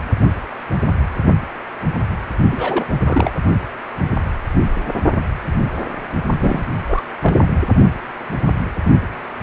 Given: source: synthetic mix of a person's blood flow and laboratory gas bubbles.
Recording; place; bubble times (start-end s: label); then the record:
Doppler ultrasound of blood flow; precordium
2.51-2.85 s: bubbles
3.00-3.32 s: bubbles
6.41-6.64 s: bubbles
6.86-7.04 s: bubbles
7.21-7.35 s: bubbles
7.42-7.46 s: bubbles
From the record:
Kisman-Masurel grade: 222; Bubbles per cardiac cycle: several, 3 to 8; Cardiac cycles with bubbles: 10 to 50%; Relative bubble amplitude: moderate (0.250 to 0.450); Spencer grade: 2 (many but less than half of the cardiac periods contain bubble signals, singularly or in groups); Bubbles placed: only in the low amplitude regions of the cardiac cycle